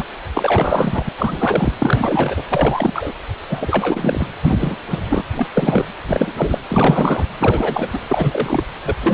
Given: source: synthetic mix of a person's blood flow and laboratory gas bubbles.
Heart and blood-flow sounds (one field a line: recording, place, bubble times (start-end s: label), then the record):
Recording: Doppler ultrasound of blood flow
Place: precordium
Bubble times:
0.00-0.05 s: bubbles
0.33-1.09 s: bubbles
1.18-1.71 s: bubbles
1.79-2.43 s: bubbles
2.50-3.13 s: bubbles
3.49-4.25 s: bubbles
4.42-4.76 s: bubbles
4.90-4.98 s: bubbles
5.10-5.25 s: bubbles
5.36-5.47 s: bubbles
5.54-5.86 s: bubbles
6.08-6.58 s: bubbles
6.69-7.25 s: bubbles
7.40-7.89 s: bubbles
7.93-7.99 s: bubbles
8.08-8.63 s: bubbles
8.85-8.96 s: bubbles
9.02-9.14 s: bubbles
From the record:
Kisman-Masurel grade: 342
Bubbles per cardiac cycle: rolling drumbeat, 9 or more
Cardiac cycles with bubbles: 100%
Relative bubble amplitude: moderate (0.250 to 0.450)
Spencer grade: 3 (all of the cardiac periods contain showers or single bubble signals, but not dominating or overriding the cardiac motion signals)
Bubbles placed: anywhere in the cardiac cycle